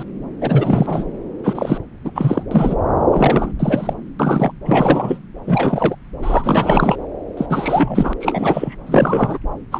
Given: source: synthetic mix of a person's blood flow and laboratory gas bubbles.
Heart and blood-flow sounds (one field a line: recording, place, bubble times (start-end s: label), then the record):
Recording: Doppler ultrasound of blood flow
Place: subclavian vein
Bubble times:
0.00-0.03 s: bubbles
0.41-1.06 s: bubbles
1.44-1.78 s: bubbles
2.04-2.11 s: bubbles
2.15-2.43 s: bubbles
2.51-2.75 s: bubbles
3.11-3.53 s: bubbles
3.59-3.94 s: bubbles
4.19-4.52 s: bubbles
4.65-5.20 s: bubbles
5.47-5.96 s: bubbles
6.22-6.98 s: bubbles
7.37-7.46 s: bubbles
7.50-8.13 s: bubbles
8.20-8.76 s: bubbles
8.86-9.38 s: bubbles
9.71-9.80 s: bubbles
From the record:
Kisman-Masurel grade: 343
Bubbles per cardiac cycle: rolling drumbeat, 9 or more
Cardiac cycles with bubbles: 100%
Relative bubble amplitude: loud (0.450 to 0.775)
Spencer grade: 3 (all of the cardiac periods contain showers or single bubble signals, but not dominating or overriding the cardiac motion signals)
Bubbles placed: anywhere in the cardiac cycle